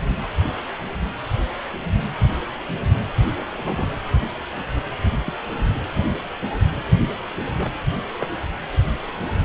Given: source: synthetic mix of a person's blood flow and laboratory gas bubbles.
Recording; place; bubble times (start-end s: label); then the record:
Doppler ultrasound of blood flow; precordium
3.54-3.91 s: bubbles
5.25-5.33 s: bubbles
5.50-5.79 s: bubbles
7.45-7.52 s: bubbles
7.56-7.72 s: bubbles
8.19-8.27 s: bubbles
From the record:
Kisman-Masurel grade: 121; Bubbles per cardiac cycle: 1 to 2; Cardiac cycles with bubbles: 10 to 50%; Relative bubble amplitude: barely perceptible (0.100 to 0.250); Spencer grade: 2 (many but less than half of the cardiac periods contain bubble signals, singularly or in groups); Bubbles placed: anywhere in the cardiac cycle